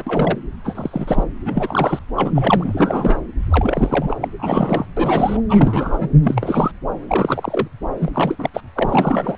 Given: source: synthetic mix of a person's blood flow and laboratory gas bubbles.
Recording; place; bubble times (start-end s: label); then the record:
Doppler ultrasound of blood flow; subclavian vein
0.00-0.02 s: bubbles
0.07-0.38 s: bubbles
0.64-1.24 s: bubbles
1.45-1.99 s: bubbles
2.15-2.31 s: bubbles
2.34-3.21 s: bubbles
3.50-4.27 s: bubbles
4.38-4.85 s: bubbles
4.96-5.41 s: bubbles
5.49-6.09 s: bubbles
6.22-6.71 s: bubbles
7.08-7.67 s: bubbles
8.00-8.36 s: bubbles
8.39-8.50 s: bubbles
8.54-8.61 s: bubbles
8.75-9.38 s: bubbles
From the record:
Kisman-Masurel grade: 342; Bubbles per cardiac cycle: rolling drumbeat, 9 or more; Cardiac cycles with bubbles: 100%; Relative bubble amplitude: moderate (0.250 to 0.450); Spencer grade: 3 (all of the cardiac periods contain showers or single bubble signals, but not dominating or overriding the cardiac motion signals); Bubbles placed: anywhere in the cardiac cycle